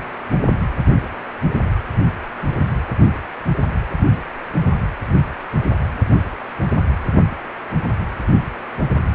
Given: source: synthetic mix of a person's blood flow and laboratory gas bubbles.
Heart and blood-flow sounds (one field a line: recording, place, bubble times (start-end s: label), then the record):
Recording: Doppler ultrasound of blood flow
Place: precordium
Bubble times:
no bubbles
From the record:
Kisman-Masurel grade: 000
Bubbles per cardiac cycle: 0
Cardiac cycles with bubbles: 0%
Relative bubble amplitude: no bubbles discernible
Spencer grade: 0 (complete lack of bubble signals)